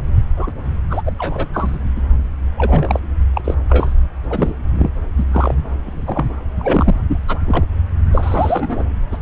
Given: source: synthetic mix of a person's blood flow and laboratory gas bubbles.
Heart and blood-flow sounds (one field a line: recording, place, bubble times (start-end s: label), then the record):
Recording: Doppler ultrasound of blood flow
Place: subclavian vein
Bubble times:
0.36-0.51 s: bubbles
0.90-1.01 s: bubbles
1.06-1.11 s: bubbles
1.18-1.49 s: bubbles
1.53-1.78 s: bubbles
1.96-2.02 s: bubbles
2.57-3.00 s: bubbles
3.33-3.41 s: bubbles
3.44-3.54 s: bubbles
3.70-3.94 s: bubbles
4.29-4.55 s: bubbles
4.73-4.88 s: bubbles
5.17-5.25 s: bubbles
5.31-5.54 s: bubbles
5.86-6.27 s: bubbles
6.59-6.95 s: bubbles
7.08-7.17 s: bubbles
7.28-7.38 s: bubbles
7.46-7.64 s: bubbles
8.12-8.84 s: bubbles
9.11-9.18 s: bubbles
From the record:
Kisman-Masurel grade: 242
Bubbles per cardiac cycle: several, 3 to 8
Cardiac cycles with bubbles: 100%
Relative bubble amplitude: moderate (0.250 to 0.450)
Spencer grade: 3 (all of the cardiac periods contain showers or single bubble signals, but not dominating or overriding the cardiac motion signals)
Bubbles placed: anywhere in the cardiac cycle